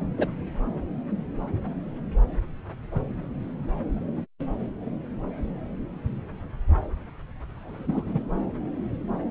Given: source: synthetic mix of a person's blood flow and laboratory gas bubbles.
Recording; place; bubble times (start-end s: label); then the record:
Doppler ultrasound of blood flow; subclavian vein
0.18-0.27 s: bubbles
7.55-8.12 s: bubbles
8.15-8.23 s: bubbles
From the record:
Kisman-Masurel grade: 122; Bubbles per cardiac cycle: 1 to 2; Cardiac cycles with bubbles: 10 to 50%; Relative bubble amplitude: moderate (0.250 to 0.450); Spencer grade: 2 (many but less than half of the cardiac periods contain bubble signals, singularly or in groups); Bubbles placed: anywhere in the cardiac cycle